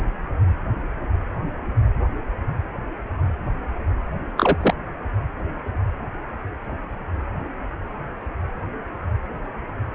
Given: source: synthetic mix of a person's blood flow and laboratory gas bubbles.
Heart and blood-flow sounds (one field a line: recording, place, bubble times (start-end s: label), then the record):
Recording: Doppler ultrasound of blood flow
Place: precordium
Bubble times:
4.37-4.57 s: bubbles
4.62-4.74 s: bubbles
From the record:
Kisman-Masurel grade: 212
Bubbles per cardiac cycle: several, 3 to 8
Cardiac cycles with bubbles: 1 to 10%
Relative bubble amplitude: moderate (0.250 to 0.450)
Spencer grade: 1 (occasional bubble signal discernible with the cardiac motion signal, with majority of cardiac periods free of bubbles)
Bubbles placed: anywhere in the cardiac cycle